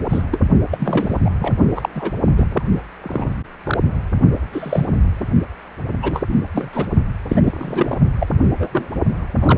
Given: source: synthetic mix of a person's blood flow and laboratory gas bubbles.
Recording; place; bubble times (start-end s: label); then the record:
Doppler ultrasound of blood flow; precordium
0.10-0.23 s: bubbles
0.31-0.39 s: bubbles
0.71-1.17 s: bubbles
1.25-1.30 s: bubbles
1.40-1.54 s: bubbles
1.75-1.89 s: bubbles
1.95-2.11 s: bubbles
2.37-2.63 s: bubbles
3.03-3.34 s: bubbles
3.63-3.77 s: bubbles
4.53-4.87 s: bubbles
5.12-5.27 s: bubbles
6.02-6.23 s: bubbles
6.29-6.34 s: bubbles
6.53-6.70 s: bubbles
6.73-6.87 s: bubbles
7.29-7.41 s: bubbles
7.44-7.97 s: bubbles
8.18-8.27 s: bubbles
8.58-8.69 s: bubbles
8.72-8.89 s: bubbles
9.41-9.58 s: bubbles
From the record:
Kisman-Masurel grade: 242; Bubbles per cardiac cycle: several, 3 to 8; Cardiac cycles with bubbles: 100%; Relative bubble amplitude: moderate (0.250 to 0.450); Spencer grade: 3 (all of the cardiac periods contain showers or single bubble signals, but not dominating or overriding the cardiac motion signals); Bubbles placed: only in the low amplitude regions of the cardiac cycle